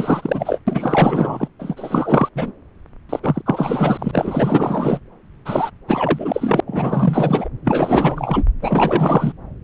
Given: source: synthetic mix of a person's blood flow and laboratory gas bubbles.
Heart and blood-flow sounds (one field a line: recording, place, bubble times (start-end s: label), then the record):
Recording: Doppler ultrasound of blood flow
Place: subclavian vein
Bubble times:
0.00-0.59 s: bubbles
0.67-1.48 s: bubbles
1.59-2.29 s: bubbles
2.35-2.52 s: bubbles
3.09-3.20 s: bubbles
3.23-3.42 s: bubbles
3.46-5.00 s: bubbles
5.45-5.71 s: bubbles
5.88-6.60 s: bubbles
6.66-7.48 s: bubbles
7.64-8.44 s: bubbles
8.62-9.33 s: bubbles
From the record:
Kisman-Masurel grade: 444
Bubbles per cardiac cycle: continuous sound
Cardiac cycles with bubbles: 100%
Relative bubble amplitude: maximal (0.775 to 0.999)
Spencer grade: 4 (maximum detectable bubble signal sounding continuously throughout systole and diastole of every cardiac period, and overriding the amplitude of the normal cardiac signals)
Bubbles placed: anywhere in the cardiac cycle